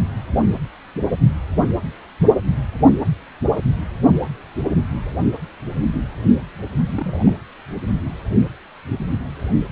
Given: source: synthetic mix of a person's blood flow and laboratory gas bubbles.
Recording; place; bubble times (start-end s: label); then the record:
Doppler ultrasound of blood flow; precordium
6.88-7.42 s: bubbles
From the record:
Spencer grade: 1 (occasional bubble signal discernible with the cardiac motion signal, with majority of cardiac periods free of bubbles); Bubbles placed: anywhere in the cardiac cycle